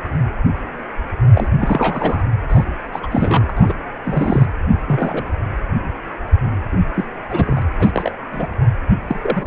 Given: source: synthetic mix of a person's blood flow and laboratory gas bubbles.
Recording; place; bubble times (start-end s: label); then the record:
Doppler ultrasound of blood flow; precordium
1.33-1.48 s: bubbles
1.59-2.23 s: bubbles
2.49-2.65 s: bubbles
2.92-2.99 s: bubbles
3.02-3.06 s: bubbles
3.10-3.54 s: bubbles
3.56-3.74 s: bubbles
4.04-4.46 s: bubbles
4.87-5.31 s: bubbles
6.71-6.80 s: bubbles
6.95-7.04 s: bubbles
7.30-7.62 s: bubbles
7.79-7.91 s: bubbles
7.93-8.11 s: bubbles
8.31-8.47 s: bubbles
9.07-9.47 s: bubbles
From the record:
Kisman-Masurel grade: 232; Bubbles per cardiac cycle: several, 3 to 8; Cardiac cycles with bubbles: 50 to 99%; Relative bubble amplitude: moderate (0.250 to 0.450); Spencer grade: 3 (all of the cardiac periods contain showers or single bubble signals, but not dominating or overriding the cardiac motion signals); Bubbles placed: anywhere in the cardiac cycle